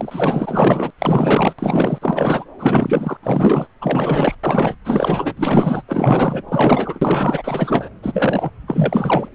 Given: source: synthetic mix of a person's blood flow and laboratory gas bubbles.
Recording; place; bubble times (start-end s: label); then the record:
Doppler ultrasound of blood flow; subclavian vein
0.00-0.90 s: bubbles
0.98-1.55 s: bubbles
1.59-1.99 s: bubbles
2.01-2.44 s: bubbles
2.59-3.17 s: bubbles
3.22-3.67 s: bubbles
3.81-4.35 s: bubbles
4.43-4.75 s: bubbles
4.84-5.34 s: bubbles
5.37-5.82 s: bubbles
5.88-6.42 s: bubbles
6.48-7.88 s: bubbles
8.03-8.50 s: bubbles
8.68-9.29 s: bubbles
From the record:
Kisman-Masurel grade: 444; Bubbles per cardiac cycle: continuous sound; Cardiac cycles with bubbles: 100%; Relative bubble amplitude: maximal (0.775 to 0.999); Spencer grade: 4 (maximum detectable bubble signal sounding continuously throughout systole and diastole of every cardiac period, and overriding the amplitude of the normal cardiac signals); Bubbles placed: anywhere in the cardiac cycle